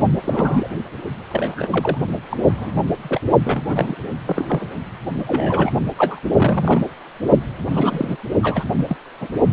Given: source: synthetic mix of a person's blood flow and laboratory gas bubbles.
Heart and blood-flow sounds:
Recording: Doppler ultrasound of blood flow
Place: precordium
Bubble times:
0.00-0.08 s: bubbles
0.16-0.69 s: bubbles
1.31-1.98 s: bubbles
2.30-2.37 s: bubbles
2.47-2.72 s: bubbles
3.04-3.20 s: bubbles
3.44-3.61 s: bubbles
3.67-3.95 s: bubbles
4.25-4.69 s: bubbles
5.15-5.71 s: bubbles
5.96-6.21 s: bubbles
6.36-6.83 s: bubbles
7.71-8.17 s: bubbles
8.43-8.64 s: bubbles
8.77-8.86 s: bubbles
8.88-8.96 s: bubbles
9.21-9.28 s: bubbles
From the record:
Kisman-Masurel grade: 242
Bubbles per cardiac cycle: several, 3 to 8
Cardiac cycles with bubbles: 100%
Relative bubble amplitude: moderate (0.250 to 0.450)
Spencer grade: 3 (all of the cardiac periods contain showers or single bubble signals, but not dominating or overriding the cardiac motion signals)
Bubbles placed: only in the low amplitude regions of the cardiac cycle

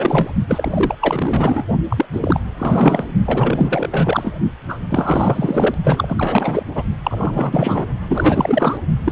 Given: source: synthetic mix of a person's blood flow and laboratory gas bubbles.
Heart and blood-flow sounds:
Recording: Doppler ultrasound of blood flow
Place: precordium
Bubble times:
0.00-0.30 s: bubbles
0.47-0.95 s: bubbles
1.01-1.64 s: bubbles
1.89-2.05 s: bubbles
2.12-2.40 s: bubbles
2.58-3.07 s: bubbles
3.25-4.33 s: bubbles
4.68-4.78 s: bubbles
4.88-5.75 s: bubbles
5.83-6.63 s: bubbles
6.75-6.83 s: bubbles
7.04-7.86 s: bubbles
8.08-8.78 s: bubbles
9.04-9.12 s: bubbles
From the record:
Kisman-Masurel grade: 444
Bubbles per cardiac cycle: continuous sound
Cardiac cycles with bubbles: 100%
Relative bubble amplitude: maximal (0.775 to 0.999)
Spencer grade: 4 (maximum detectable bubble signal sounding continuously throughout systole and diastole of every cardiac period, and overriding the amplitude of the normal cardiac signals)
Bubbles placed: only in the low amplitude regions of the cardiac cycle

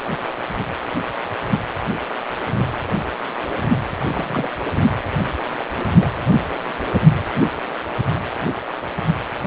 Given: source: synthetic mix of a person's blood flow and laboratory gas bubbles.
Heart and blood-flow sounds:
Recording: Doppler ultrasound of blood flow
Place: precordium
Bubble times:
4.00-4.52 s: bubbles
5.20-5.24 s: bubbles
5.52-5.71 s: bubbles
5.99-6.12 s: bubbles
From the record:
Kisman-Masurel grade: 221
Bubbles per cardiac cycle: several, 3 to 8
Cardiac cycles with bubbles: 10 to 50%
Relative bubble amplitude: barely perceptible (0.100 to 0.250)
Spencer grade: 2 (many but less than half of the cardiac periods contain bubble signals, singularly or in groups)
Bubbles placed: anywhere in the cardiac cycle

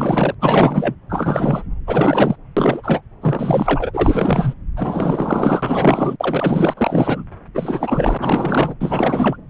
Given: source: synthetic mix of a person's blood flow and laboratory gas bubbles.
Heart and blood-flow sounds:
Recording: Doppler ultrasound of blood flow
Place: subclavian vein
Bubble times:
0.00-0.35 s: bubbles
0.40-0.96 s: bubbles
1.09-1.63 s: bubbles
1.86-2.36 s: bubbles
2.56-3.01 s: bubbles
3.21-4.54 s: bubbles
4.76-6.16 s: bubbles
6.20-6.74 s: bubbles
6.77-7.24 s: bubbles
7.54-8.75 s: bubbles
8.80-9.37 s: bubbles
From the record:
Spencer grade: 4 (maximum detectable bubble signal sounding continuously throughout systole and diastole of every cardiac period, and overriding the amplitude of the normal cardiac signals)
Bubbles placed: anywhere in the cardiac cycle

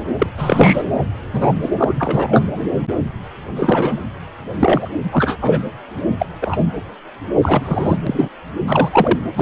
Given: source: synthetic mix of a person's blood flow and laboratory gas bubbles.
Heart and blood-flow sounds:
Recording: Doppler ultrasound of blood flow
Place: precordium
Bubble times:
0.18-0.27 s: bubbles
0.37-0.82 s: bubbles
1.33-1.52 s: bubbles
1.61-1.70 s: bubbles
1.77-1.94 s: bubbles
1.99-2.48 s: bubbles
3.55-3.99 s: bubbles
4.60-4.89 s: bubbles
5.11-5.37 s: bubbles
5.41-5.61 s: bubbles
6.18-6.26 s: bubbles
6.41-6.58 s: bubbles
7.42-7.97 s: bubbles
8.06-8.29 s: bubbles
8.67-9.20 s: bubbles
9.33-9.42 s: bubbles
From the record:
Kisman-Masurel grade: 233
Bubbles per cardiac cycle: several, 3 to 8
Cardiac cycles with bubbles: 50 to 99%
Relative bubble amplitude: loud (0.450 to 0.775)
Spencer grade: 3 (all of the cardiac periods contain showers or single bubble signals, but not dominating or overriding the cardiac motion signals)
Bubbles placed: anywhere in the cardiac cycle

